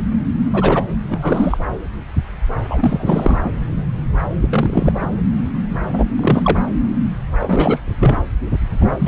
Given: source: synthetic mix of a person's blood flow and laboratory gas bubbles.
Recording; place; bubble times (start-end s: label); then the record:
Doppler ultrasound of blood flow; subclavian vein
0.52-0.83 s: bubbles
1.09-1.58 s: bubbles
2.69-3.52 s: bubbles
4.41-4.92 s: bubbles
4.95-5.07 s: bubbles
5.93-6.05 s: bubbles
6.19-6.62 s: bubbles
7.40-7.78 s: bubbles
7.85-8.16 s: bubbles
8.80-8.94 s: bubbles
8.98-9.08 s: bubbles
From the record:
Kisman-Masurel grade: 223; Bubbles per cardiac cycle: several, 3 to 8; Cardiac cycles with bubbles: 10 to 50%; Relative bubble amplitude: loud (0.450 to 0.775); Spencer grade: 2 (many but less than half of the cardiac periods contain bubble signals, singularly or in groups); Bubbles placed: anywhere in the cardiac cycle